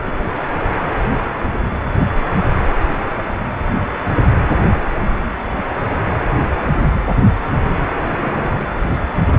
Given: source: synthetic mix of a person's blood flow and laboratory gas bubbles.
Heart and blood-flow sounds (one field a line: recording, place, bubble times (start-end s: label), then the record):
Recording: Doppler ultrasound of blood flow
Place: precordium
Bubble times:
0.07-0.12 s: bubbles
8.11-8.64 s: bubbles
From the record:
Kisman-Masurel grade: 122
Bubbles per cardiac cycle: 1 to 2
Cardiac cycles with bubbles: 10 to 50%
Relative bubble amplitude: moderate (0.250 to 0.450)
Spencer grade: 2 (many but less than half of the cardiac periods contain bubble signals, singularly or in groups)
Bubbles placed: anywhere in the cardiac cycle